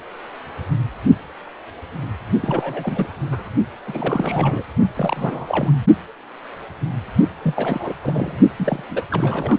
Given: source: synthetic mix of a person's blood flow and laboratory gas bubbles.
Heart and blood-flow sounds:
Doppler ultrasound of blood flow; precordium
2.41-3.14 s: bubbles
3.31-3.50 s: bubbles
3.87-4.63 s: bubbles
4.95-5.71 s: bubbles
7.43-7.93 s: bubbles
8.03-8.37 s: bubbles
8.58-8.82 s: bubbles
8.89-9.04 s: bubbles
9.10-9.58 s: bubbles
From the record:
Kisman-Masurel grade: 332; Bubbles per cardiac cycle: rolling drumbeat, 9 or more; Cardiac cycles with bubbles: 50 to 99%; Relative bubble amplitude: moderate (0.250 to 0.450); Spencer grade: 3 (all of the cardiac periods contain showers or single bubble signals, but not dominating or overriding the cardiac motion signals); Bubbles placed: only in the low amplitude regions of the cardiac cycle

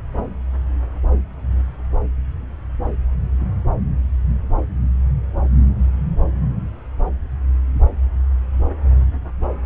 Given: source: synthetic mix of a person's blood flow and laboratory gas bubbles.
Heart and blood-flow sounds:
Doppler ultrasound of blood flow; subclavian vein
no bubbles
From the record:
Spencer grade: 0 (complete lack of bubble signals)

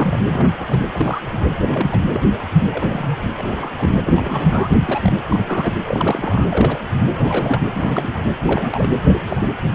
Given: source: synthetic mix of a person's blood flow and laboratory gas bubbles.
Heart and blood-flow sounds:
Doppler ultrasound of blood flow; precordium
0.00-0.19 s: bubbles
0.31-0.78 s: bubbles
0.93-1.20 s: bubbles
1.33-1.47 s: bubbles
1.68-1.99 s: bubbles
2.13-2.21 s: bubbles
2.33-2.44 s: bubbles
2.71-3.17 s: bubbles
3.38-3.71 s: bubbles
3.78-3.95 s: bubbles
4.04-4.69 s: bubbles
4.74-4.79 s: bubbles
4.88-5.12 s: bubbles
5.29-5.74 s: bubbles
5.88-6.48 s: bubbles
6.51-6.79 s: bubbles
7.10-7.58 s: bubbles
7.71-8.27 s: bubbles
8.46-8.90 s: bubbles
9.05-9.20 s: bubbles
9.26-9.48 s: bubbles
From the record:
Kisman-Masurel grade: 242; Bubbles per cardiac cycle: several, 3 to 8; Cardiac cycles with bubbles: 100%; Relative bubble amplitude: moderate (0.250 to 0.450); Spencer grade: 3 (all of the cardiac periods contain showers or single bubble signals, but not dominating or overriding the cardiac motion signals); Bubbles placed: anywhere in the cardiac cycle

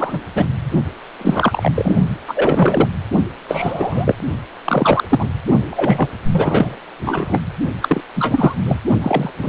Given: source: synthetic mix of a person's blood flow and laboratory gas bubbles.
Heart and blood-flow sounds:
Doppler ultrasound of blood flow; precordium
0.00-0.21 s: bubbles
0.35-0.46 s: bubbles
1.18-1.72 s: bubbles
1.75-1.96 s: bubbles
2.28-2.88 s: bubbles
3.49-4.14 s: bubbles
4.64-5.29 s: bubbles
5.70-6.08 s: bubbles
6.32-6.76 s: bubbles
7.05-7.39 s: bubbles
7.81-8.01 s: bubbles
8.15-8.55 s: bubbles
8.65-8.79 s: bubbles
9.01-9.31 s: bubbles
9.41-9.49 s: bubbles
From the record:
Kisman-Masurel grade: 343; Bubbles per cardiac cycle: rolling drumbeat, 9 or more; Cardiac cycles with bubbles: 100%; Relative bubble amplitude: loud (0.450 to 0.775); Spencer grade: 3 (all of the cardiac periods contain showers or single bubble signals, but not dominating or overriding the cardiac motion signals); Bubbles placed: only in the low amplitude regions of the cardiac cycle

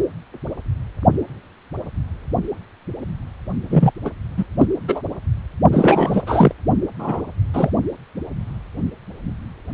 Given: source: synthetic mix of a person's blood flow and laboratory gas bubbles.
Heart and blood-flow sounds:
Doppler ultrasound of blood flow; precordium
3.70-3.91 s: bubbles
4.04-4.10 s: bubbles
4.37-4.46 s: bubbles
4.58-4.66 s: bubbles
4.88-5.01 s: bubbles
5.71-6.22 s: bubbles
6.26-6.52 s: bubbles
6.98-7.21 s: bubbles
7.54-7.70 s: bubbles
From the record:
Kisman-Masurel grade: 223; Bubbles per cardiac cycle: several, 3 to 8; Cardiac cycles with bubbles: 10 to 50%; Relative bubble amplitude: loud (0.450 to 0.775); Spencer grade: 2 (many but less than half of the cardiac periods contain bubble signals, singularly or in groups); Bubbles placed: only in the low amplitude regions of the cardiac cycle

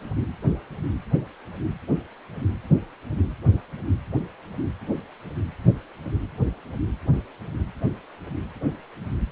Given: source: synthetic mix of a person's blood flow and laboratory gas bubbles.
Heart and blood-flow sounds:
Doppler ultrasound of blood flow; precordium
no bubbles
From the record:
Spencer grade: 0 (complete lack of bubble signals)

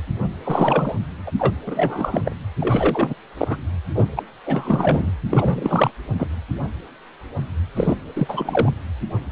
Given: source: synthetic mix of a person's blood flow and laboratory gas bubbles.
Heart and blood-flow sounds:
Doppler ultrasound of blood flow; precordium
0.44-0.95 s: bubbles
1.27-1.31 s: bubbles
1.39-1.54 s: bubbles
1.66-2.36 s: bubbles
2.60-3.14 s: bubbles
3.37-3.57 s: bubbles
3.94-4.06 s: bubbles
4.15-4.23 s: bubbles
4.46-5.11 s: bubbles
5.30-5.91 s: bubbles
6.18-6.27 s: bubbles
7.76-7.95 s: bubbles
8.15-8.73 s: bubbles
From the record:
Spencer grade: 3 (all of the cardiac periods contain showers or single bubble signals, but not dominating or overriding the cardiac motion signals); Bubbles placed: anywhere in the cardiac cycle

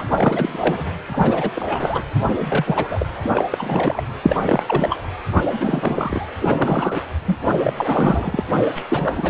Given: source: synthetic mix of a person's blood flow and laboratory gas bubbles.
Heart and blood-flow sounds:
Doppler ultrasound of blood flow; precordium
0.00-0.03 s: bubbles
0.10-0.85 s: bubbles
1.06-1.50 s: bubbles
1.54-2.02 s: bubbles
2.29-2.33 s: bubbles
2.37-3.06 s: bubbles
3.24-3.44 s: bubbles
3.51-4.02 s: bubbles
4.22-4.37 s: bubbles
4.42-4.63 s: bubbles
4.66-5.04 s: bubbles
5.35-5.41 s: bubbles
5.51-6.30 s: bubbles
6.40-6.94 s: bubbles
7.25-7.39 s: bubbles
7.62-8.43 s: bubbles
8.74-8.82 s: bubbles
8.88-9.30 s: bubbles
From the record:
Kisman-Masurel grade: 343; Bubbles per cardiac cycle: rolling drumbeat, 9 or more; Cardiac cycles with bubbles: 100%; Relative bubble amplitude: loud (0.450 to 0.775); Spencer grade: 3 (all of the cardiac periods contain showers or single bubble signals, but not dominating or overriding the cardiac motion signals); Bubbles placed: anywhere in the cardiac cycle

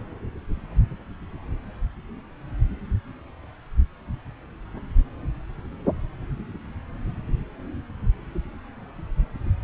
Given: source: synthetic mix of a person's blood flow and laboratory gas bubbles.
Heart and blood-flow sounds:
Doppler ultrasound of blood flow; subclavian vein
no bubbles
From the record:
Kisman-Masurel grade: 000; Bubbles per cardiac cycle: 0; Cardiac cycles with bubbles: 0%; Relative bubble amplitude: no bubbles discernible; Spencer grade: 0 (complete lack of bubble signals)

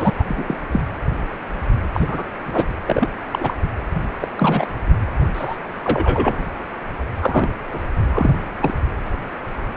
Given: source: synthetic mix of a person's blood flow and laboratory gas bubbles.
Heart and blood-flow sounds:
Doppler ultrasound of blood flow; precordium
0.00-0.10 s: bubbles
0.19-0.24 s: bubbles
0.28-0.57 s: bubbles
0.72-0.81 s: bubbles
1.94-2.24 s: bubbles
2.44-2.66 s: bubbles
2.86-3.08 s: bubbles
3.31-3.56 s: bubbles
4.21-4.28 s: bubbles
4.36-4.67 s: bubbles
5.33-5.57 s: bubbles
5.83-6.51 s: bubbles
7.21-7.49 s: bubbles
7.73-7.79 s: bubbles
8.07-8.36 s: bubbles
8.61-8.74 s: bubbles
From the record:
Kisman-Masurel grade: 233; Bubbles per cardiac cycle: several, 3 to 8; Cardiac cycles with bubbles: 50 to 99%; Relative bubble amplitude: loud (0.450 to 0.775); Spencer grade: 3 (all of the cardiac periods contain showers or single bubble signals, but not dominating or overriding the cardiac motion signals); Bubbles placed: anywhere in the cardiac cycle

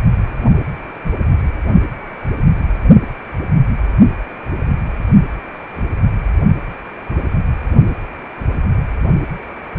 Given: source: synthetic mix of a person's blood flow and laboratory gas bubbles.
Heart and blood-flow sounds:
Doppler ultrasound of blood flow; precordium
2.16-2.25 s: bubbles
From the record:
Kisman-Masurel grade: 111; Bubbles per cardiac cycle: 1 to 2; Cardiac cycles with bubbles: 1 to 10%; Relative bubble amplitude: barely perceptible (0.100 to 0.250); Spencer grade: 1 (occasional bubble signal discernible with the cardiac motion signal, with majority of cardiac periods free of bubbles); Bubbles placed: anywhere in the cardiac cycle

